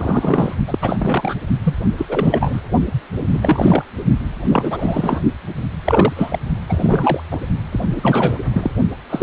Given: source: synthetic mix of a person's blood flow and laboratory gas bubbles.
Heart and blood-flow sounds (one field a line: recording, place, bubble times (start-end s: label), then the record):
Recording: Doppler ultrasound of blood flow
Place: precordium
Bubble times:
0.00-0.55 s: bubbles
0.67-0.79 s: bubbles
0.82-1.35 s: bubbles
1.63-1.75 s: bubbles
1.98-2.05 s: bubbles
2.08-2.60 s: bubbles
3.31-3.83 s: bubbles
4.46-5.20 s: bubbles
5.85-6.39 s: bubbles
6.68-7.20 s: bubbles
7.31-7.38 s: bubbles
7.71-7.80 s: bubbles
7.90-8.37 s: bubbles
8.53-8.71 s: bubbles
9.10-9.23 s: bubbles
From the record:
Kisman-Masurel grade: 343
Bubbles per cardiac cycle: rolling drumbeat, 9 or more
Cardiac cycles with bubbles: 100%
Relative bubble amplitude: loud (0.450 to 0.775)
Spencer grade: 3 (all of the cardiac periods contain showers or single bubble signals, but not dominating or overriding the cardiac motion signals)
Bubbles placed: only in the low amplitude regions of the cardiac cycle